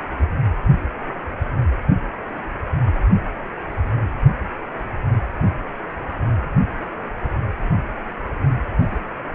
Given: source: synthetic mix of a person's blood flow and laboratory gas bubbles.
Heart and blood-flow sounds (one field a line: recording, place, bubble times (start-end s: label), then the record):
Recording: Doppler ultrasound of blood flow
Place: precordium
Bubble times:
8.80-8.97 s: bubbles
From the record:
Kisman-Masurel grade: 111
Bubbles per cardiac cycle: 1 to 2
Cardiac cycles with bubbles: 1 to 10%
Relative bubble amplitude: barely perceptible (0.100 to 0.250)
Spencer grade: 1 (occasional bubble signal discernible with the cardiac motion signal, with majority of cardiac periods free of bubbles)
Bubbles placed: anywhere in the cardiac cycle